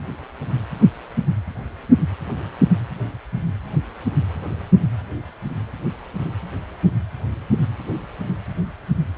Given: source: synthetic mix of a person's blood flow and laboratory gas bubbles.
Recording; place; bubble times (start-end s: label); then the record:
Doppler ultrasound of blood flow; precordium
no bubbles
From the record:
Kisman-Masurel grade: 000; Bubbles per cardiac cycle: 0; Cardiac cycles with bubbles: 0%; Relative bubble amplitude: no bubbles discernible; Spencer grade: 0 (complete lack of bubble signals)